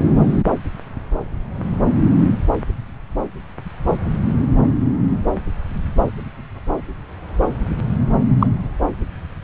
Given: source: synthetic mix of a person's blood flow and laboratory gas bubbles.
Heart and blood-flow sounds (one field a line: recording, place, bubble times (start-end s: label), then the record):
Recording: Doppler ultrasound of blood flow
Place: subclavian vein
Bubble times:
0.00-0.04 s: bubbles
8.39-8.46 s: bubbles
From the record:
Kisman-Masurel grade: 113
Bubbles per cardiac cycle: 1 to 2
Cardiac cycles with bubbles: 1 to 10%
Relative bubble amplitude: loud (0.450 to 0.775)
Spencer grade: 1 (occasional bubble signal discernible with the cardiac motion signal, with majority of cardiac periods free of bubbles)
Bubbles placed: anywhere in the cardiac cycle